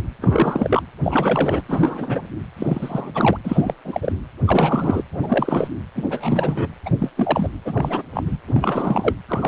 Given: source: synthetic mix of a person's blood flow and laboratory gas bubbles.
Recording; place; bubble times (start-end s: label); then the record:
Doppler ultrasound of blood flow; precordium
0.21-0.82 s: bubbles
1.03-1.61 s: bubbles
1.68-2.28 s: bubbles
2.56-3.37 s: bubbles
3.44-3.74 s: bubbles
3.84-4.12 s: bubbles
4.47-5.03 s: bubbles
5.12-5.67 s: bubbles
5.95-6.69 s: bubbles
6.86-6.90 s: bubbles
6.98-7.09 s: bubbles
7.17-7.48 s: bubbles
7.65-8.02 s: bubbles
8.13-8.37 s: bubbles
8.47-9.13 s: bubbles
9.28-9.48 s: bubbles
From the record:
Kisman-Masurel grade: 342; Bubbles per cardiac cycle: rolling drumbeat, 9 or more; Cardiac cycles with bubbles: 100%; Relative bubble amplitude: moderate (0.250 to 0.450); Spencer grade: 3 (all of the cardiac periods contain showers or single bubble signals, but not dominating or overriding the cardiac motion signals); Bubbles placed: anywhere in the cardiac cycle